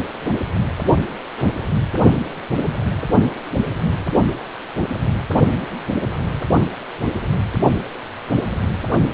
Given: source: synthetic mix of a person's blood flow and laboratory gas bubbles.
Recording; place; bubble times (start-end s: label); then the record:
Doppler ultrasound of blood flow; precordium
1.36-1.46 s: bubbles
From the record:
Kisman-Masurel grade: 111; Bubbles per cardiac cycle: 1 to 2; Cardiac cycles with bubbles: 1 to 10%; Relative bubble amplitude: barely perceptible (0.100 to 0.250); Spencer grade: 1 (occasional bubble signal discernible with the cardiac motion signal, with majority of cardiac periods free of bubbles); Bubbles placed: only in the low amplitude regions of the cardiac cycle